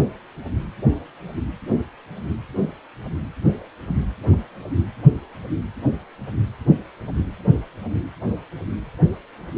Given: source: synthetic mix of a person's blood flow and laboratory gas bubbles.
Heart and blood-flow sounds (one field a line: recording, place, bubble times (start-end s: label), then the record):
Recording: Doppler ultrasound of blood flow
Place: precordium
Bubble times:
no bubbles
From the record:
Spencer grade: 0 (complete lack of bubble signals)